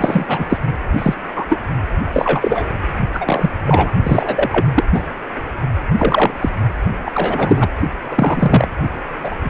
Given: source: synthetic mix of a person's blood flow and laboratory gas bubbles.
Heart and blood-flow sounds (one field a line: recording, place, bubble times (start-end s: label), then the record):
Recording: Doppler ultrasound of blood flow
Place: precordium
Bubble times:
0.00-0.47 s: bubbles
0.49-0.60 s: bubbles
0.98-1.15 s: bubbles
1.35-1.45 s: bubbles
1.50-1.60 s: bubbles
2.12-2.67 s: bubbles
3.13-3.50 s: bubbles
3.66-3.92 s: bubbles
4.03-4.66 s: bubbles
4.75-4.84 s: bubbles
4.93-5.00 s: bubbles
5.99-6.31 s: bubbles
6.41-6.49 s: bubbles
7.05-7.12 s: bubbles
7.14-7.68 s: bubbles
8.11-8.68 s: bubbles
9.18-9.36 s: bubbles
9.44-9.50 s: bubbles
From the record:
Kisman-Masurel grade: 243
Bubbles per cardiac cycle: several, 3 to 8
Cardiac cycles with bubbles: 100%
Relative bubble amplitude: loud (0.450 to 0.775)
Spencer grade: 3 (all of the cardiac periods contain showers or single bubble signals, but not dominating or overriding the cardiac motion signals)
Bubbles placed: only in the low amplitude regions of the cardiac cycle